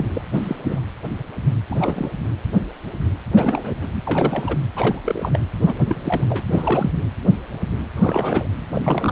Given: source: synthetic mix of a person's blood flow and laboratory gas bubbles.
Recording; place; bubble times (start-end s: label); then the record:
Doppler ultrasound of blood flow; precordium
0.00-0.05 s: bubbles
0.14-0.22 s: bubbles
0.33-0.56 s: bubbles
0.64-0.81 s: bubbles
1.70-2.10 s: bubbles
3.35-3.75 s: bubbles
3.81-3.88 s: bubbles
4.05-4.57 s: bubbles
4.75-5.01 s: bubbles
5.04-5.39 s: bubbles
5.66-5.73 s: bubbles
5.85-6.26 s: bubbles
6.29-6.45 s: bubbles
6.47-6.90 s: bubbles
7.96-8.47 s: bubbles
8.73-9.12 s: bubbles
From the record:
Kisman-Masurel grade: 232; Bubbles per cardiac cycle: several, 3 to 8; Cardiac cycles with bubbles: 50 to 99%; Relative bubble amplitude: moderate (0.250 to 0.450); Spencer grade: 3 (all of the cardiac periods contain showers or single bubble signals, but not dominating or overriding the cardiac motion signals); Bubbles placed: anywhere in the cardiac cycle